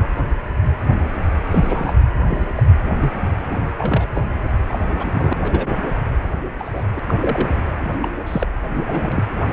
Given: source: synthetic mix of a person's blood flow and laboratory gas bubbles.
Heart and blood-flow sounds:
Doppler ultrasound of blood flow; precordium
0.00-0.07 s: bubbles
1.51-1.94 s: bubbles
2.25-2.48 s: bubbles
2.55-2.63 s: bubbles
3.00-3.31 s: bubbles
3.42-3.65 s: bubbles
3.78-4.07 s: bubbles
4.15-4.21 s: bubbles
4.68-4.79 s: bubbles
4.97-5.33 s: bubbles
5.41-5.93 s: bubbles
6.58-6.83 s: bubbles
6.96-7.00 s: bubbles
7.07-7.15 s: bubbles
7.21-7.62 s: bubbles
7.80-7.91 s: bubbles
8.00-8.08 s: bubbles
8.26-8.47 s: bubbles
8.74-9.23 s: bubbles
From the record:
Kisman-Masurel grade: 232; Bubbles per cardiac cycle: several, 3 to 8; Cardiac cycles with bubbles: 50 to 99%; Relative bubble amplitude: moderate (0.250 to 0.450); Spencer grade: 3 (all of the cardiac periods contain showers or single bubble signals, but not dominating or overriding the cardiac motion signals); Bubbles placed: anywhere in the cardiac cycle

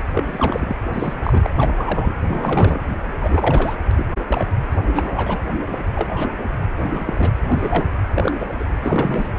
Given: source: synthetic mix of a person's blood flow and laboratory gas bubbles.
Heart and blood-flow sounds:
Doppler ultrasound of blood flow; precordium
0.15-0.76 s: bubbles
0.93-1.14 s: bubbles
1.23-1.50 s: bubbles
1.59-2.13 s: bubbles
2.27-2.79 s: bubbles
3.04-3.76 s: bubbles
3.91-4.06 s: bubbles
4.27-4.45 s: bubbles
4.87-5.39 s: bubbles
5.69-5.79 s: bubbles
5.95-6.30 s: bubbles
6.82-7.04 s: bubbles
7.07-7.32 s: bubbles
7.49-7.88 s: bubbles
8.15-8.31 s: bubbles
8.40-8.47 s: bubbles
8.59-8.65 s: bubbles
8.81-9.28 s: bubbles
From the record:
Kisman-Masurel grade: 242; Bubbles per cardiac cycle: several, 3 to 8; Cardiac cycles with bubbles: 100%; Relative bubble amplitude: moderate (0.250 to 0.450); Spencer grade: 3 (all of the cardiac periods contain showers or single bubble signals, but not dominating or overriding the cardiac motion signals); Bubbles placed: anywhere in the cardiac cycle

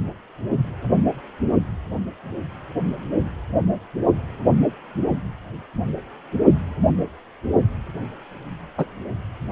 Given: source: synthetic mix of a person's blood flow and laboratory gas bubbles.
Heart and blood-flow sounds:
Doppler ultrasound of blood flow; precordium
8.77-8.86 s: bubbles
From the record:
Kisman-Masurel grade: 113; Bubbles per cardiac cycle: 1 to 2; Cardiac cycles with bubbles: 1 to 10%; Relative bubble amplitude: loud (0.450 to 0.775); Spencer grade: 1 (occasional bubble signal discernible with the cardiac motion signal, with majority of cardiac periods free of bubbles); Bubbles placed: only in the low amplitude regions of the cardiac cycle

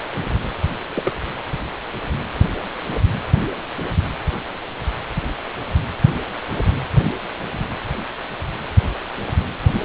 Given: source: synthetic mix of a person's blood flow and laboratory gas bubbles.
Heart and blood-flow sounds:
Doppler ultrasound of blood flow; precordium
0.95-1.14 s: bubbles
From the record:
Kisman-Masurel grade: 222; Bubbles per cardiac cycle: several, 3 to 8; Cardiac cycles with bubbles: 10 to 50%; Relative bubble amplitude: moderate (0.250 to 0.450); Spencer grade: 2 (many but less than half of the cardiac periods contain bubble signals, singularly or in groups); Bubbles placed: anywhere in the cardiac cycle

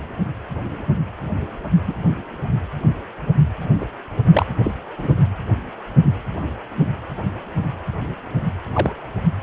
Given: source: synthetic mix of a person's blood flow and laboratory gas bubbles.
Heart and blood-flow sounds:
Doppler ultrasound of blood flow; precordium
1.87-1.95 s: bubbles
3.81-3.85 s: bubbles
4.32-4.46 s: bubbles
4.64-4.72 s: bubbles
4.98-5.17 s: bubbles
8.73-8.93 s: bubbles
From the record:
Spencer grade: 2 (many but less than half of the cardiac periods contain bubble signals, singularly or in groups); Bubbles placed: anywhere in the cardiac cycle

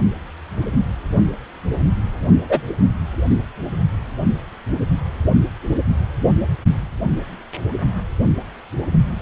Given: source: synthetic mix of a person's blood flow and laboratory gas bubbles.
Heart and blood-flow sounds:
Doppler ultrasound of blood flow; precordium
2.48-2.61 s: bubbles
From the record:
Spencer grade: 2 (many but less than half of the cardiac periods contain bubble signals, singularly or in groups); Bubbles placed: only in the low amplitude regions of the cardiac cycle

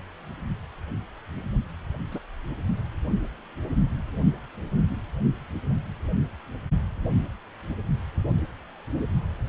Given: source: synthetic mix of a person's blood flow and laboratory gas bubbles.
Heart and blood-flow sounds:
Doppler ultrasound of blood flow; precordium
2.11-2.19 s: bubbles
From the record:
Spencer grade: 1 (occasional bubble signal discernible with the cardiac motion signal, with majority of cardiac periods free of bubbles); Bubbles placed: only in the low amplitude regions of the cardiac cycle

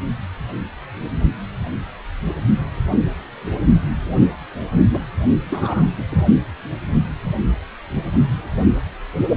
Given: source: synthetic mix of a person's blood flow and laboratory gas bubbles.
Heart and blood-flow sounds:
Doppler ultrasound of blood flow; precordium
4.93-4.98 s: bubbles
5.49-5.84 s: bubbles
5.98-6.03 s: bubbles
6.09-6.25 s: bubbles
From the record:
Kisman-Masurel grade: 212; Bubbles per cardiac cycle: several, 3 to 8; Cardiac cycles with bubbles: 1 to 10%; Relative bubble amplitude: moderate (0.250 to 0.450); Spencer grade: 1 (occasional bubble signal discernible with the cardiac motion signal, with majority of cardiac periods free of bubbles); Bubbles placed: only in the low amplitude regions of the cardiac cycle

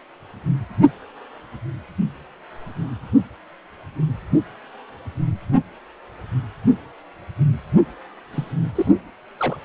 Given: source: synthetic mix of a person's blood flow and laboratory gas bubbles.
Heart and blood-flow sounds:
Doppler ultrasound of blood flow; precordium
8.32-8.54 s: bubbles
8.75-8.91 s: bubbles
9.38-9.57 s: bubbles
From the record:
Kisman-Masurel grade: 211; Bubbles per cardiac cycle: several, 3 to 8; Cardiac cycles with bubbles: 1 to 10%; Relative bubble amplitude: barely perceptible (0.100 to 0.250); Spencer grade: 1 (occasional bubble signal discernible with the cardiac motion signal, with majority of cardiac periods free of bubbles); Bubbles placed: only in the low amplitude regions of the cardiac cycle

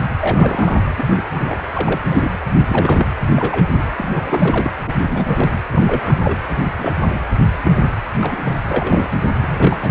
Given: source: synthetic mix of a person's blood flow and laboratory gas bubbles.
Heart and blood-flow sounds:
Doppler ultrasound of blood flow; precordium
0.21-0.84 s: bubbles
0.97-1.23 s: bubbles
1.34-1.62 s: bubbles
1.73-2.01 s: bubbles
2.10-2.31 s: bubbles
2.67-3.07 s: bubbles
3.36-3.65 s: bubbles
3.70-3.82 s: bubbles
3.97-4.71 s: bubbles
4.85-4.93 s: bubbles
5.08-5.50 s: bubbles
5.72-6.39 s: bubbles
6.77-6.94 s: bubbles
7.11-7.19 s: bubbles
7.63-7.92 s: bubbles
8.20-8.37 s: bubbles
8.45-8.58 s: bubbles
8.70-9.10 s: bubbles
9.41-9.77 s: bubbles
9.81-9.91 s: bubbles
From the record:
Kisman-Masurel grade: 242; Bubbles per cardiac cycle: several, 3 to 8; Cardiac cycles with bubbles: 100%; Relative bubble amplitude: moderate (0.250 to 0.450); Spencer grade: 3 (all of the cardiac periods contain showers or single bubble signals, but not dominating or overriding the cardiac motion signals); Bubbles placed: anywhere in the cardiac cycle

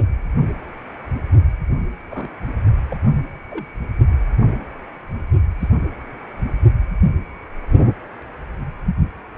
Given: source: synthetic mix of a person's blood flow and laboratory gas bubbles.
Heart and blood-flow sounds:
Doppler ultrasound of blood flow; precordium
2.10-2.29 s: bubbles
2.90-2.97 s: bubbles
3.49-3.65 s: bubbles
5.60-5.69 s: bubbles
From the record:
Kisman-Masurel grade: 121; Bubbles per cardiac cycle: 1 to 2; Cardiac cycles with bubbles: 10 to 50%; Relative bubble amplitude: barely perceptible (0.100 to 0.250); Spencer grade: 2 (many but less than half of the cardiac periods contain bubble signals, singularly or in groups); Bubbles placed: only in the low amplitude regions of the cardiac cycle

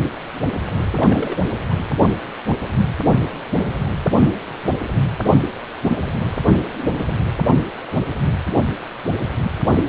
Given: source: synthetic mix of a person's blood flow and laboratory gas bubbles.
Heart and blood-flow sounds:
Doppler ultrasound of blood flow; precordium
0.93-1.36 s: bubbles
1.70-1.74 s: bubbles
From the record:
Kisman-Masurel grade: 211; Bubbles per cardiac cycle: several, 3 to 8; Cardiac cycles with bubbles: 1 to 10%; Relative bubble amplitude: barely perceptible (0.100 to 0.250); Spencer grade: 1 (occasional bubble signal discernible with the cardiac motion signal, with majority of cardiac periods free of bubbles); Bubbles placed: anywhere in the cardiac cycle

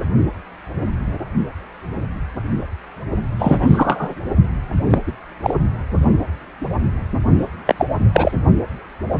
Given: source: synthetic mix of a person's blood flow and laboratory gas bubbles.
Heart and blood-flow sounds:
Doppler ultrasound of blood flow; precordium
3.39-4.14 s: bubbles
4.90-4.98 s: bubbles
5.06-5.12 s: bubbles
5.42-5.54 s: bubbles
7.66-7.75 s: bubbles
7.78-7.85 s: bubbles
8.12-8.32 s: bubbles
From the record:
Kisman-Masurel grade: 223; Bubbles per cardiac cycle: several, 3 to 8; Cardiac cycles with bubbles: 10 to 50%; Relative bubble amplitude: loud (0.450 to 0.775); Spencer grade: 2 (many but less than half of the cardiac periods contain bubble signals, singularly or in groups); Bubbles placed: only in the low amplitude regions of the cardiac cycle

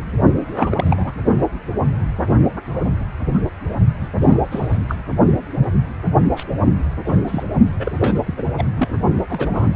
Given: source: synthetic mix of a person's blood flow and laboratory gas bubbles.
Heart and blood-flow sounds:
Doppler ultrasound of blood flow; precordium
0.53-1.13 s: bubbles
4.00-4.08 s: bubbles
4.19-4.38 s: bubbles
4.50-4.78 s: bubbles
4.88-4.96 s: bubbles
6.36-6.44 s: bubbles
7.05-7.21 s: bubbles
7.27-7.44 s: bubbles
7.79-7.92 s: bubbles
8.01-8.21 s: bubbles
8.26-8.43 s: bubbles
8.57-8.65 s: bubbles
8.75-8.98 s: bubbles
9.29-9.74 s: bubbles
From the record:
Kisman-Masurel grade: 232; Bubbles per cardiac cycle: several, 3 to 8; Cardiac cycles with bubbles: 50 to 99%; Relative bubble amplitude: moderate (0.250 to 0.450); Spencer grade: 3 (all of the cardiac periods contain showers or single bubble signals, but not dominating or overriding the cardiac motion signals); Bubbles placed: only in the low amplitude regions of the cardiac cycle

